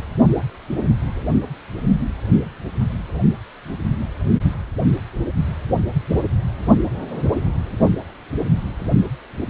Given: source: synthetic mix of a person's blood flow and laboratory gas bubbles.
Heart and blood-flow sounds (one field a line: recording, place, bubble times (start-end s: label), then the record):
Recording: Doppler ultrasound of blood flow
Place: precordium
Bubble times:
no bubbles
From the record:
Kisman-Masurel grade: 000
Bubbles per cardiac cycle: 0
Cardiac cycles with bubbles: 0%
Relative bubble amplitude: no bubbles discernible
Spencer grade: 0 (complete lack of bubble signals)